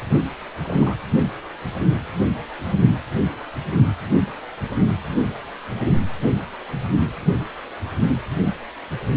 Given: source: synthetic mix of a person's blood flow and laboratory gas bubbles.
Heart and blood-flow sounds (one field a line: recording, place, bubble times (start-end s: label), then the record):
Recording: Doppler ultrasound of blood flow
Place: precordium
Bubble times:
0.62-0.97 s: bubbles
From the record:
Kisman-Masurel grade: 111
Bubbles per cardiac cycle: 1 to 2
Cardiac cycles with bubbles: 1 to 10%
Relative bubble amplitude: barely perceptible (0.100 to 0.250)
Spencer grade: 1 (occasional bubble signal discernible with the cardiac motion signal, with majority of cardiac periods free of bubbles)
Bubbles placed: anywhere in the cardiac cycle